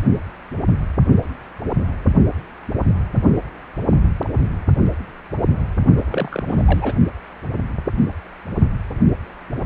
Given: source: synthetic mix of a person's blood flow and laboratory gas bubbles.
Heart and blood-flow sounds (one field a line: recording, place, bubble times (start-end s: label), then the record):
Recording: Doppler ultrasound of blood flow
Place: precordium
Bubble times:
5.97-6.03 s: bubbles
6.08-6.45 s: bubbles
6.47-6.93 s: bubbles
From the record:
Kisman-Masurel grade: 212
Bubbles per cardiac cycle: several, 3 to 8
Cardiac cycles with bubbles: 1 to 10%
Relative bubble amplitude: moderate (0.250 to 0.450)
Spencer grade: 1 (occasional bubble signal discernible with the cardiac motion signal, with majority of cardiac periods free of bubbles)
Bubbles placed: only in the low amplitude regions of the cardiac cycle